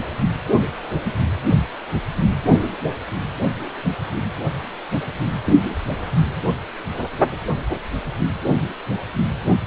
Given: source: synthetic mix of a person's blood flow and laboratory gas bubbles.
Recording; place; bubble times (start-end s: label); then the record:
Doppler ultrasound of blood flow; precordium
5.45-5.62 s: bubbles
From the record:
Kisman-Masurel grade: 111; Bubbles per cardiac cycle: 1 to 2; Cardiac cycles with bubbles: 1 to 10%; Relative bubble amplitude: barely perceptible (0.100 to 0.250); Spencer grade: 1 (occasional bubble signal discernible with the cardiac motion signal, with majority of cardiac periods free of bubbles); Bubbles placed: anywhere in the cardiac cycle